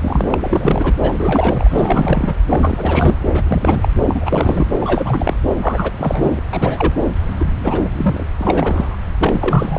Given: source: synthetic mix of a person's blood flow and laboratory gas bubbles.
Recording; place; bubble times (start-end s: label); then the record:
Doppler ultrasound of blood flow; subclavian vein
0.00-0.28 s: bubbles
0.32-0.95 s: bubbles
1.02-2.35 s: bubbles
2.48-3.16 s: bubbles
3.33-3.89 s: bubbles
4.06-4.71 s: bubbles
4.80-5.36 s: bubbles
5.61-5.91 s: bubbles
5.98-6.42 s: bubbles
6.52-6.93 s: bubbles
7.39-7.45 s: bubbles
7.63-7.89 s: bubbles
7.93-8.27 s: bubbles
8.38-8.98 s: bubbles
9.21-9.79 s: bubbles
From the record:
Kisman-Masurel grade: 333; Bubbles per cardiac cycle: rolling drumbeat, 9 or more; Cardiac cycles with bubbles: 50 to 99%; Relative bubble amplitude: loud (0.450 to 0.775); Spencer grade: 3 (all of the cardiac periods contain showers or single bubble signals, but not dominating or overriding the cardiac motion signals); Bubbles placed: anywhere in the cardiac cycle